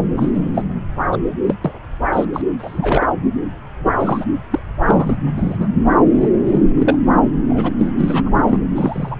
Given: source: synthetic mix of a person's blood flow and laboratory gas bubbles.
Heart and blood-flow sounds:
Doppler ultrasound of blood flow; subclavian vein
0.17-0.30 s: bubbles
0.33-0.51 s: bubbles
0.54-0.62 s: bubbles
1.12-1.18 s: bubbles
1.46-1.55 s: bubbles
1.64-1.72 s: bubbles
2.12-2.25 s: bubbles
2.33-2.42 s: bubbles
2.58-3.07 s: bubbles
3.79-3.91 s: bubbles
3.99-4.25 s: bubbles
4.51-4.59 s: bubbles
4.86-5.16 s: bubbles
5.37-5.67 s: bubbles
6.21-6.29 s: bubbles
6.45-6.62 s: bubbles
6.75-6.97 s: bubbles
7.50-7.72 s: bubbles
7.78-7.94 s: bubbles
7.97-8.30 s: bubbles
8.46-8.59 s: bubbles
8.75-9.16 s: bubbles
From the record:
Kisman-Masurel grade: 242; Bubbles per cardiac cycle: several, 3 to 8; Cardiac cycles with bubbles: 100%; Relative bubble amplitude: moderate (0.250 to 0.450); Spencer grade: 3 (all of the cardiac periods contain showers or single bubble signals, but not dominating or overriding the cardiac motion signals); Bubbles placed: anywhere in the cardiac cycle

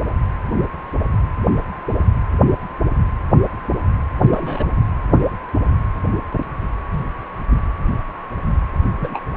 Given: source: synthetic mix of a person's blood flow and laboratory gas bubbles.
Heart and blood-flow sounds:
Doppler ultrasound of blood flow; precordium
4.28-4.64 s: bubbles
6.91-7.10 s: bubbles
8.96-9.22 s: bubbles
From the record:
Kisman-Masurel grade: 122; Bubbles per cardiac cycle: 1 to 2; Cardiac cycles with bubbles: 10 to 50%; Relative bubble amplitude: moderate (0.250 to 0.450); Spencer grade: 2 (many but less than half of the cardiac periods contain bubble signals, singularly or in groups); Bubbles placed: anywhere in the cardiac cycle

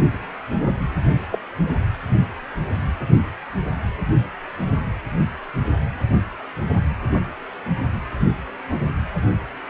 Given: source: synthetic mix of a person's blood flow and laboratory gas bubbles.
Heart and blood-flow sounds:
Doppler ultrasound of blood flow; precordium
1.30-1.39 s: bubbles
From the record:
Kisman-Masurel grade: 111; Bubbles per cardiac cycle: 1 to 2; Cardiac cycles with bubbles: 1 to 10%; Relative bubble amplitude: barely perceptible (0.100 to 0.250); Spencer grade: 1 (occasional bubble signal discernible with the cardiac motion signal, with majority of cardiac periods free of bubbles); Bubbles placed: anywhere in the cardiac cycle

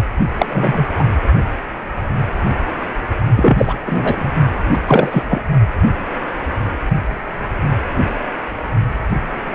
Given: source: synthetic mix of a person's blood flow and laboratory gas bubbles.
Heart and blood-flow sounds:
Doppler ultrasound of blood flow; precordium
0.38-0.46 s: bubbles
0.49-0.86 s: bubbles
0.99-1.05 s: bubbles
3.36-3.77 s: bubbles
3.87-4.32 s: bubbles
4.73-4.79 s: bubbles
4.87-5.24 s: bubbles
5.28-5.42 s: bubbles
From the record:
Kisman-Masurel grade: 223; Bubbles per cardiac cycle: several, 3 to 8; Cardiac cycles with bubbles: 10 to 50%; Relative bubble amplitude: loud (0.450 to 0.775); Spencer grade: 2 (many but less than half of the cardiac periods contain bubble signals, singularly or in groups); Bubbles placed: only in the low amplitude regions of the cardiac cycle

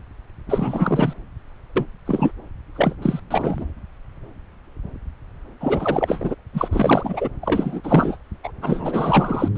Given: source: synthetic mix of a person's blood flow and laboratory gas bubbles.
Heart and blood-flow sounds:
Doppler ultrasound of blood flow; subclavian vein
0.47-1.14 s: bubbles
1.76-1.86 s: bubbles
2.06-2.32 s: bubbles
2.75-2.95 s: bubbles
3.02-3.20 s: bubbles
3.31-3.65 s: bubbles
5.61-6.35 s: bubbles
6.54-6.68 s: bubbles
6.71-7.29 s: bubbles
7.42-7.81 s: bubbles
7.83-8.16 s: bubbles
8.43-8.51 s: bubbles
8.61-9.48 s: bubbles
From the record:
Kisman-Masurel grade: 332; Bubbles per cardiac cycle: rolling drumbeat, 9 or more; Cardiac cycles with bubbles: 50 to 99%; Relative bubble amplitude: moderate (0.250 to 0.450); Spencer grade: 3 (all of the cardiac periods contain showers or single bubble signals, but not dominating or overriding the cardiac motion signals); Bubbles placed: anywhere in the cardiac cycle

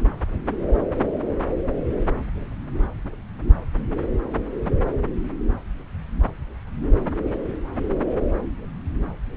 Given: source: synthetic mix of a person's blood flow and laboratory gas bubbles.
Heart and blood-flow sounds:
Doppler ultrasound of blood flow; subclavian vein
no bubbles
From the record:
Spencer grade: 0 (complete lack of bubble signals)

